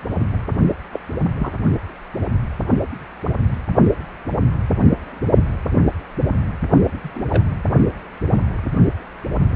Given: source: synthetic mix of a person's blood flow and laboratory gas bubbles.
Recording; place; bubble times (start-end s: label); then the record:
Doppler ultrasound of blood flow; precordium
0.93-0.99 s: bubbles
1.40-1.55 s: bubbles
7.02-7.25 s: bubbles
7.29-7.43 s: bubbles
From the record:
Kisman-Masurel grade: 122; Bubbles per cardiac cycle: 1 to 2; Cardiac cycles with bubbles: 10 to 50%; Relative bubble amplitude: moderate (0.250 to 0.450); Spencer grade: 2 (many but less than half of the cardiac periods contain bubble signals, singularly or in groups); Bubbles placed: only in the low amplitude regions of the cardiac cycle